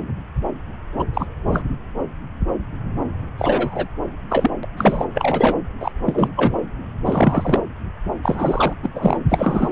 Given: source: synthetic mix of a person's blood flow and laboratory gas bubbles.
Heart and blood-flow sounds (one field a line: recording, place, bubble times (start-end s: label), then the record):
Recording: Doppler ultrasound of blood flow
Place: subclavian vein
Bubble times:
0.98-1.04 s: bubbles
1.14-1.26 s: bubbles
1.47-1.64 s: bubbles
3.38-3.88 s: bubbles
4.29-4.51 s: bubbles
4.63-4.66 s: bubbles
4.76-5.05 s: bubbles
5.14-5.56 s: bubbles
5.79-5.92 s: bubbles
6.06-6.28 s: bubbles
6.37-6.53 s: bubbles
7.05-7.61 s: bubbles
8.23-8.73 s: bubbles
8.83-8.90 s: bubbles
8.94-9.17 s: bubbles
9.29-9.72 s: bubbles
From the record:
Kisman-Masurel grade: 233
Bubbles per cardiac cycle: several, 3 to 8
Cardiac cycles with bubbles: 50 to 99%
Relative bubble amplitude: loud (0.450 to 0.775)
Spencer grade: 3 (all of the cardiac periods contain showers or single bubble signals, but not dominating or overriding the cardiac motion signals)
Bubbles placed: anywhere in the cardiac cycle